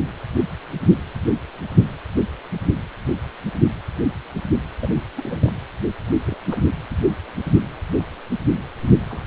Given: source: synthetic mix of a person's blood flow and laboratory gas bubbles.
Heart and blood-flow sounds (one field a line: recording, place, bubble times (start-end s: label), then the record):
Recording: Doppler ultrasound of blood flow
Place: precordium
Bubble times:
4.82-4.88 s: bubbles
4.95-5.00 s: bubbles
5.16-5.52 s: bubbles
6.25-6.38 s: bubbles
6.48-6.61 s: bubbles
9.09-9.20 s: bubbles
9.24-9.27 s: bubbles
From the record:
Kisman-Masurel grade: 221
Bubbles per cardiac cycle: several, 3 to 8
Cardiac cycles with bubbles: 10 to 50%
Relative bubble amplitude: barely perceptible (0.100 to 0.250)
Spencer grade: 2 (many but less than half of the cardiac periods contain bubble signals, singularly or in groups)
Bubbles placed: anywhere in the cardiac cycle